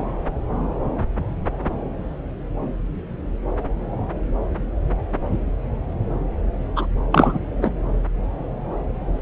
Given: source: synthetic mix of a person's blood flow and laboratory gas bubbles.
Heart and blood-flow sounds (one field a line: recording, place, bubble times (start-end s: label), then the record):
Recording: Doppler ultrasound of blood flow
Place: subclavian vein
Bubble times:
6.75-6.86 s: bubbles
7.12-7.38 s: bubbles
7.61-7.71 s: bubbles
From the record:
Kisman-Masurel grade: 213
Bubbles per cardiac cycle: several, 3 to 8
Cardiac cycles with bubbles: 1 to 10%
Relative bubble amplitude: loud (0.450 to 0.775)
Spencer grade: 1 (occasional bubble signal discernible with the cardiac motion signal, with majority of cardiac periods free of bubbles)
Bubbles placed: anywhere in the cardiac cycle